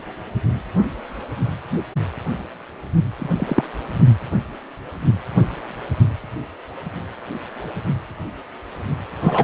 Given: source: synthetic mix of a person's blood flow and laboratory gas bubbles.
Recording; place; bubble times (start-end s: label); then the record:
Doppler ultrasound of blood flow; precordium
3.18-3.64 s: bubbles
9.22-9.44 s: bubbles
From the record:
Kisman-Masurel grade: 123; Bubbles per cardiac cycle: 1 to 2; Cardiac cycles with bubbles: 10 to 50%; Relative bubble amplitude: loud (0.450 to 0.775); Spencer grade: 2 (many but less than half of the cardiac periods contain bubble signals, singularly or in groups); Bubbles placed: only in the low amplitude regions of the cardiac cycle